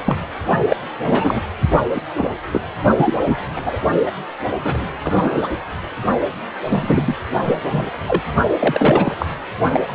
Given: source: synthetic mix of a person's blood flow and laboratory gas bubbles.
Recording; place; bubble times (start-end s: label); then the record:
Doppler ultrasound of blood flow; precordium
0.03-0.28 s: bubbles
0.68-0.77 s: bubbles
1.05-1.42 s: bubbles
1.94-2.01 s: bubbles
2.17-2.31 s: bubbles
2.52-2.62 s: bubbles
2.98-3.49 s: bubbles
3.56-3.81 s: bubbles
4.05-4.12 s: bubbles
4.62-4.93 s: bubbles
5.04-5.48 s: bubbles
6.66-7.15 s: bubbles
7.43-7.57 s: bubbles
7.71-7.93 s: bubbles
8.08-8.22 s: bubbles
8.60-9.16 s: bubbles
9.19-9.26 s: bubbles
9.73-9.81 s: bubbles
9.88-9.95 s: bubbles
From the record:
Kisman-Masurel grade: 243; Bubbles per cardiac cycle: several, 3 to 8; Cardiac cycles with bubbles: 100%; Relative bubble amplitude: loud (0.450 to 0.775); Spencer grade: 3 (all of the cardiac periods contain showers or single bubble signals, but not dominating or overriding the cardiac motion signals); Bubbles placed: only in the low amplitude regions of the cardiac cycle